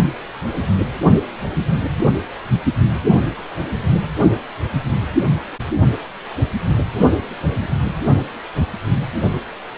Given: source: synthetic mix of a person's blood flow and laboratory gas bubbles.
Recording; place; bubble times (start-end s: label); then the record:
Doppler ultrasound of blood flow; precordium
7.50-7.67 s: bubbles
From the record:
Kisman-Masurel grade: 121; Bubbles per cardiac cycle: 1 to 2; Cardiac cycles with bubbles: 10 to 50%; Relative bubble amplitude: barely perceptible (0.100 to 0.250); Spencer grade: 2 (many but less than half of the cardiac periods contain bubble signals, singularly or in groups); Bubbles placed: only in the low amplitude regions of the cardiac cycle